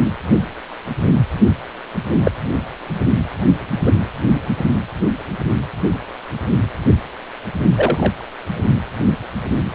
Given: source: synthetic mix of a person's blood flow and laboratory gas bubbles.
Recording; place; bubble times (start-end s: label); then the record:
Doppler ultrasound of blood flow; precordium
2.24-2.31 s: bubbles
3.85-3.92 s: bubbles
7.75-8.12 s: bubbles
From the record:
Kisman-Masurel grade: 123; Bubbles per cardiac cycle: 1 to 2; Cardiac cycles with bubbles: 10 to 50%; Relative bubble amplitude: loud (0.450 to 0.775); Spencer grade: 2 (many but less than half of the cardiac periods contain bubble signals, singularly or in groups); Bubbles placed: only in the low amplitude regions of the cardiac cycle